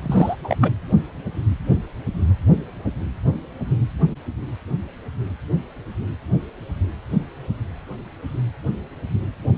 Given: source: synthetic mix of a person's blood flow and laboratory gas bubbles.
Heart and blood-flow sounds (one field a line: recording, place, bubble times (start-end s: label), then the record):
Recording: Doppler ultrasound of blood flow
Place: precordium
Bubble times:
0.02-0.35 s: bubbles
0.44-0.56 s: bubbles
0.60-0.71 s: bubbles
From the record:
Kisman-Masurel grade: 212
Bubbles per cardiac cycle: several, 3 to 8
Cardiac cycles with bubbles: 1 to 10%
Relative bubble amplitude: moderate (0.250 to 0.450)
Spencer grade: 1 (occasional bubble signal discernible with the cardiac motion signal, with majority of cardiac periods free of bubbles)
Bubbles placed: anywhere in the cardiac cycle